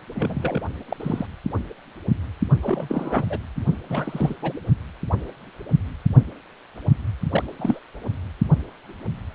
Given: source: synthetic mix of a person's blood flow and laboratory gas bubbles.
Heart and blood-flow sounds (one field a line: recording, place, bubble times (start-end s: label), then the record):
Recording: Doppler ultrasound of blood flow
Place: precordium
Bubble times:
0.15-0.59 s: bubbles
0.90-0.96 s: bubbles
0.99-1.26 s: bubbles
2.62-3.24 s: bubbles
3.29-3.38 s: bubbles
3.90-4.35 s: bubbles
4.42-4.53 s: bubbles
7.31-7.43 s: bubbles
7.57-7.80 s: bubbles
From the record:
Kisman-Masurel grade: 232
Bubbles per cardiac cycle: several, 3 to 8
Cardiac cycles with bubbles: 50 to 99%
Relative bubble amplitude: moderate (0.250 to 0.450)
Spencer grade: 3 (all of the cardiac periods contain showers or single bubble signals, but not dominating or overriding the cardiac motion signals)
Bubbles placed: only in the low amplitude regions of the cardiac cycle